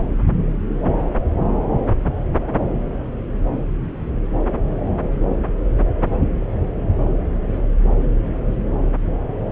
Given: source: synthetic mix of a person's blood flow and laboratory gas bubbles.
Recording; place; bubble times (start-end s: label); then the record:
Doppler ultrasound of blood flow; subclavian vein
1.00-1.05 s: bubbles
1.33-1.41 s: bubbles
5.85-6.11 s: bubbles
From the record:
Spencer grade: 2 (many but less than half of the cardiac periods contain bubble signals, singularly or in groups); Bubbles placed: anywhere in the cardiac cycle